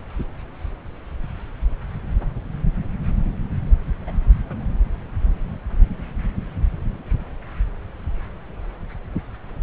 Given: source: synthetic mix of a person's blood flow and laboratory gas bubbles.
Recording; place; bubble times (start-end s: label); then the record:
Doppler ultrasound of blood flow; subclavian vein
4.06-4.12 s: bubbles
4.49-4.55 s: bubbles
From the record:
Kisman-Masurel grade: 121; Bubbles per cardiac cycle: 1 to 2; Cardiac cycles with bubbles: 10 to 50%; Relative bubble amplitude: barely perceptible (0.100 to 0.250); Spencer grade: 2 (many but less than half of the cardiac periods contain bubble signals, singularly or in groups); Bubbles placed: anywhere in the cardiac cycle